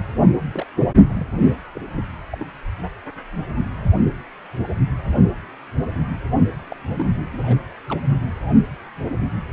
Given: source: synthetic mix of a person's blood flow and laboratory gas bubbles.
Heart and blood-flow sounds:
Doppler ultrasound of blood flow; precordium
0.53-0.65 s: bubbles
1.04-1.28 s: bubbles
1.75-2.04 s: bubbles
2.31-2.47 s: bubbles
6.70-6.76 s: bubbles
6.92-7.04 s: bubbles
7.31-7.62 s: bubbles
7.89-8.00 s: bubbles
From the record:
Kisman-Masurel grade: 221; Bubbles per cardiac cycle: several, 3 to 8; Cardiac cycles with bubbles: 10 to 50%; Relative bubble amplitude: barely perceptible (0.100 to 0.250); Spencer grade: 2 (many but less than half of the cardiac periods contain bubble signals, singularly or in groups); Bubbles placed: only in the low amplitude regions of the cardiac cycle

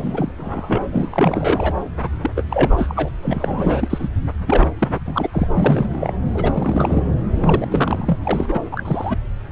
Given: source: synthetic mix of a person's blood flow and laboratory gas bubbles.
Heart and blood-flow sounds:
Doppler ultrasound of blood flow; subclavian vein
0.00-0.32 s: bubbles
0.38-0.86 s: bubbles
0.90-1.74 s: bubbles
2.02-2.10 s: bubbles
2.23-2.31 s: bubbles
2.35-2.43 s: bubbles
2.49-3.08 s: bubbles
3.22-4.08 s: bubbles
4.47-4.66 s: bubbles
4.78-4.99 s: bubbles
5.05-5.27 s: bubbles
5.31-5.47 s: bubbles
5.54-6.13 s: bubbles
6.34-7.03 s: bubbles
7.30-7.67 s: bubbles
7.70-8.18 s: bubbles
8.24-8.60 s: bubbles
8.71-8.83 s: bubbles
8.85-9.17 s: bubbles
From the record:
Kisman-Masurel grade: 342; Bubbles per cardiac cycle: rolling drumbeat, 9 or more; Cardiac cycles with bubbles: 100%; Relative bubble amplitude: moderate (0.250 to 0.450); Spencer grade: 3 (all of the cardiac periods contain showers or single bubble signals, but not dominating or overriding the cardiac motion signals); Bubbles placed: anywhere in the cardiac cycle

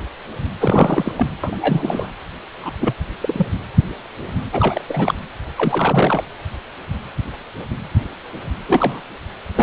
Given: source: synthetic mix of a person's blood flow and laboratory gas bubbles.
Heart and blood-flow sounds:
Doppler ultrasound of blood flow; precordium
0.60-1.12 s: bubbles
1.16-1.27 s: bubbles
1.44-2.08 s: bubbles
2.61-2.72 s: bubbles
2.80-2.95 s: bubbles
3.21-3.47 s: bubbles
4.53-4.84 s: bubbles
4.88-5.15 s: bubbles
5.58-6.24 s: bubbles
8.66-9.01 s: bubbles
9.54-9.63 s: bubbles
From the record:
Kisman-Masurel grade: 232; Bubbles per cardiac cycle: several, 3 to 8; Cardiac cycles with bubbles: 50 to 99%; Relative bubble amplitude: moderate (0.250 to 0.450); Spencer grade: 3 (all of the cardiac periods contain showers or single bubble signals, but not dominating or overriding the cardiac motion signals); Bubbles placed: anywhere in the cardiac cycle

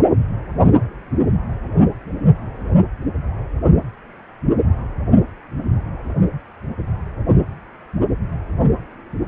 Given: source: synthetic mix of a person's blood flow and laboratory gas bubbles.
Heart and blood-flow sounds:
Doppler ultrasound of blood flow; precordium
no bubbles
From the record:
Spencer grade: 0 (complete lack of bubble signals)

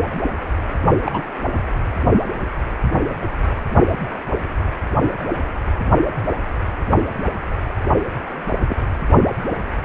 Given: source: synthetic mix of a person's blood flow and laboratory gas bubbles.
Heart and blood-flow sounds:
Doppler ultrasound of blood flow; precordium
1.05-1.21 s: bubbles
8.69-8.75 s: bubbles
From the record:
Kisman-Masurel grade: 122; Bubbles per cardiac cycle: 1 to 2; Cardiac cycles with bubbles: 10 to 50%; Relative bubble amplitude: moderate (0.250 to 0.450); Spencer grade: 2 (many but less than half of the cardiac periods contain bubble signals, singularly or in groups); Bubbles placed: only in the low amplitude regions of the cardiac cycle

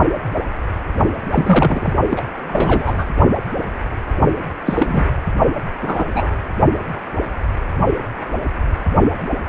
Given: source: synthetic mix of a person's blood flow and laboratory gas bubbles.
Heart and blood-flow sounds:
Doppler ultrasound of blood flow; precordium
1.32-1.93 s: bubbles
2.10-2.23 s: bubbles
2.47-3.09 s: bubbles
4.65-5.05 s: bubbles
5.82-6.05 s: bubbles
6.14-6.37 s: bubbles
From the record:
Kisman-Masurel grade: 223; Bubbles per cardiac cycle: several, 3 to 8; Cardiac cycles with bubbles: 10 to 50%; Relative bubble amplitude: loud (0.450 to 0.775); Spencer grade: 2 (many but less than half of the cardiac periods contain bubble signals, singularly or in groups); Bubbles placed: only in the low amplitude regions of the cardiac cycle

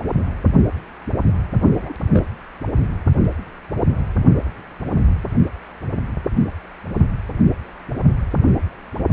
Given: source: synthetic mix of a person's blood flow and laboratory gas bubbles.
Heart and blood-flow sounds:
Doppler ultrasound of blood flow; precordium
1.78-1.93 s: bubbles
2.10-2.23 s: bubbles
From the record:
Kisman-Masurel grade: 121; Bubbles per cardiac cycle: 1 to 2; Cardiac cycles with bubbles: 10 to 50%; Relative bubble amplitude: barely perceptible (0.100 to 0.250); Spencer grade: 2 (many but less than half of the cardiac periods contain bubble signals, singularly or in groups); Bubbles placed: only in the low amplitude regions of the cardiac cycle

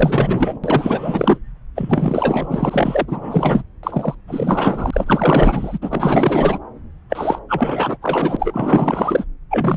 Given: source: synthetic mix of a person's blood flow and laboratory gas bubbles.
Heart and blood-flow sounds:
Doppler ultrasound of blood flow; subclavian vein
0.00-0.59 s: bubbles
0.64-1.38 s: bubbles
1.75-3.63 s: bubbles
3.83-4.15 s: bubbles
4.28-5.79 s: bubbles
5.82-6.58 s: bubbles
7.10-7.39 s: bubbles
7.49-7.98 s: bubbles
8.01-9.24 s: bubbles
9.50-9.77 s: bubbles
From the record:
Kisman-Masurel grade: 444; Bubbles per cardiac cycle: continuous sound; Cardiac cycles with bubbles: 100%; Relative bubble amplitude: maximal (0.775 to 0.999); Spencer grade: 4 (maximum detectable bubble signal sounding continuously throughout systole and diastole of every cardiac period, and overriding the amplitude of the normal cardiac signals); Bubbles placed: anywhere in the cardiac cycle

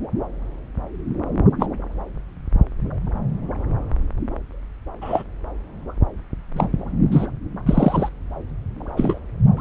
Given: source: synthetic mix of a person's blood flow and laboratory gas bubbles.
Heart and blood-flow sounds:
Doppler ultrasound of blood flow; subclavian vein
1.59-1.66 s: bubbles
5.01-5.24 s: bubbles
6.56-6.66 s: bubbles
7.12-7.26 s: bubbles
7.66-8.09 s: bubbles
8.97-9.18 s: bubbles
9.57-9.61 s: bubbles
From the record:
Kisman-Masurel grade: 123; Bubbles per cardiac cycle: 1 to 2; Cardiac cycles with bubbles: 10 to 50%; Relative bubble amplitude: loud (0.450 to 0.775); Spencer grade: 2 (many but less than half of the cardiac periods contain bubble signals, singularly or in groups); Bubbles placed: anywhere in the cardiac cycle

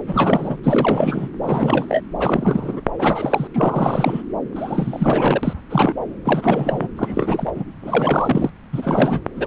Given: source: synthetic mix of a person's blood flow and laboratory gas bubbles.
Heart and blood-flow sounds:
Doppler ultrasound of blood flow; subclavian vein
0.07-0.56 s: bubbles
0.63-1.29 s: bubbles
1.42-1.85 s: bubbles
1.89-2.02 s: bubbles
2.19-2.82 s: bubbles
2.98-3.48 s: bubbles
3.54-4.22 s: bubbles
4.55-5.54 s: bubbles
5.70-5.94 s: bubbles
6.25-6.88 s: bubbles
6.96-7.52 s: bubbles
7.55-7.63 s: bubbles
7.81-8.51 s: bubbles
8.72-9.22 s: bubbles
9.35-9.47 s: bubbles
From the record:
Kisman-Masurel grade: 342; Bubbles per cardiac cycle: rolling drumbeat, 9 or more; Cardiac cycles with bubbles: 100%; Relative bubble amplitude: moderate (0.250 to 0.450); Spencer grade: 3 (all of the cardiac periods contain showers or single bubble signals, but not dominating or overriding the cardiac motion signals); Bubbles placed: anywhere in the cardiac cycle

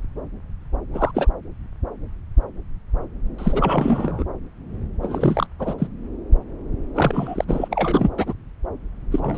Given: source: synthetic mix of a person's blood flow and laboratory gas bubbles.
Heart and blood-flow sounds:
Doppler ultrasound of blood flow; subclavian vein
0.94-1.11 s: bubbles
1.14-1.27 s: bubbles
3.38-4.24 s: bubbles
5.02-5.46 s: bubbles
5.59-5.74 s: bubbles
5.78-5.88 s: bubbles
6.94-7.44 s: bubbles
7.47-7.68 s: bubbles
7.71-8.12 s: bubbles
8.16-8.33 s: bubbles
9.12-9.38 s: bubbles
From the record:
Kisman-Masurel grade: 233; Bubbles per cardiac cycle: several, 3 to 8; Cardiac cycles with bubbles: 50 to 99%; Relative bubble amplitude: loud (0.450 to 0.775); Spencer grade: 3 (all of the cardiac periods contain showers or single bubble signals, but not dominating or overriding the cardiac motion signals); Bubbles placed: anywhere in the cardiac cycle

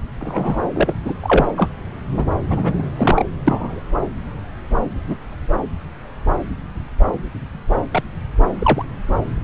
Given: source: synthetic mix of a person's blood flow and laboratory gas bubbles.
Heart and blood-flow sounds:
Doppler ultrasound of blood flow; subclavian vein
0.20-0.57 s: bubbles
0.74-0.93 s: bubbles
1.05-1.14 s: bubbles
1.23-1.47 s: bubbles
1.56-1.68 s: bubbles
2.16-2.25 s: bubbles
2.49-2.82 s: bubbles
2.97-3.24 s: bubbles
3.46-3.80 s: bubbles
5.06-5.16 s: bubbles
7.92-8.03 s: bubbles
8.59-8.85 s: bubbles
From the record:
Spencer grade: 2 (many but less than half of the cardiac periods contain bubble signals, singularly or in groups); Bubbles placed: anywhere in the cardiac cycle

